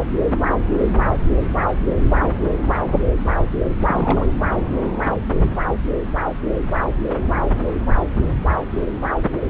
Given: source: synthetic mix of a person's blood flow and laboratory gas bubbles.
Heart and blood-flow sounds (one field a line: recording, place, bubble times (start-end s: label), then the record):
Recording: Doppler ultrasound of blood flow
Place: subclavian vein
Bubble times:
3.80-4.27 s: bubbles
From the record:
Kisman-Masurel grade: 212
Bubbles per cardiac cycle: several, 3 to 8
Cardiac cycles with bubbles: 1 to 10%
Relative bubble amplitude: moderate (0.250 to 0.450)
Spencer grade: 1 (occasional bubble signal discernible with the cardiac motion signal, with majority of cardiac periods free of bubbles)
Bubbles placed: anywhere in the cardiac cycle